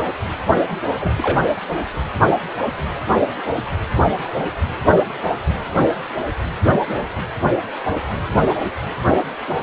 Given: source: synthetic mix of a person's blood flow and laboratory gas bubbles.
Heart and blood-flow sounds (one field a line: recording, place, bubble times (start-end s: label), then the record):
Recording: Doppler ultrasound of blood flow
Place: precordium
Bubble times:
1.01-1.14 s: bubbles
1.18-1.43 s: bubbles
From the record:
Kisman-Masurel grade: 112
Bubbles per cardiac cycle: 1 to 2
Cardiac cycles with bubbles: 1 to 10%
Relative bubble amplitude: moderate (0.250 to 0.450)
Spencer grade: 1 (occasional bubble signal discernible with the cardiac motion signal, with majority of cardiac periods free of bubbles)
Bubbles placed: anywhere in the cardiac cycle